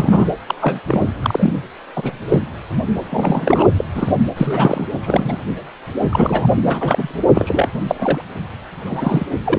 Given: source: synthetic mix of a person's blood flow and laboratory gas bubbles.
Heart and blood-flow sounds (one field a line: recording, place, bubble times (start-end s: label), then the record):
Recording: Doppler ultrasound of blood flow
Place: precordium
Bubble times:
0.00-0.30 s: bubbles
0.46-0.55 s: bubbles
0.61-0.80 s: bubbles
0.88-1.02 s: bubbles
1.22-1.53 s: bubbles
1.96-2.20 s: bubbles
2.29-2.42 s: bubbles
3.10-3.64 s: bubbles
3.77-3.85 s: bubbles
3.94-4.12 s: bubbles
4.36-4.87 s: bubbles
5.02-5.38 s: bubbles
6.10-6.48 s: bubbles
6.65-7.14 s: bubbles
7.34-7.68 s: bubbles
7.74-7.81 s: bubbles
7.88-8.21 s: bubbles
8.85-9.26 s: bubbles
9.46-9.59 s: bubbles
From the record:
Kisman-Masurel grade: 233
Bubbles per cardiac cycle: several, 3 to 8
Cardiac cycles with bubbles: 50 to 99%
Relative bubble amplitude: loud (0.450 to 0.775)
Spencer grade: 3 (all of the cardiac periods contain showers or single bubble signals, but not dominating or overriding the cardiac motion signals)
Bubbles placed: anywhere in the cardiac cycle